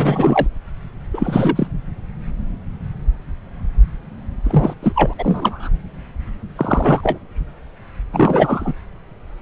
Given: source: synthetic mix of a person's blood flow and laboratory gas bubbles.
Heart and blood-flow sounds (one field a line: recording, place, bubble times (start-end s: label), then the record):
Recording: Doppler ultrasound of blood flow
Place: subclavian vein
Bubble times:
0.00-0.47 s: bubbles
1.14-1.68 s: bubbles
4.44-4.74 s: bubbles
4.82-5.13 s: bubbles
5.18-5.70 s: bubbles
6.55-7.18 s: bubbles
8.12-8.73 s: bubbles
From the record:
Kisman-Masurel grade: 223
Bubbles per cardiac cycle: several, 3 to 8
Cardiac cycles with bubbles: 10 to 50%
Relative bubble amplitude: loud (0.450 to 0.775)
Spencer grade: 2 (many but less than half of the cardiac periods contain bubble signals, singularly or in groups)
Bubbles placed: anywhere in the cardiac cycle